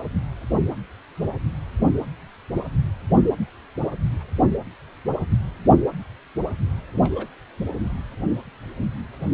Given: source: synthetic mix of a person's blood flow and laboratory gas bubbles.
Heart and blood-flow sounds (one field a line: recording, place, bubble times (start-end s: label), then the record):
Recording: Doppler ultrasound of blood flow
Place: precordium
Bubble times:
6.93-6.98 s: bubbles
7.01-7.28 s: bubbles
From the record:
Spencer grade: 2 (many but less than half of the cardiac periods contain bubble signals, singularly or in groups)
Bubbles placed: anywhere in the cardiac cycle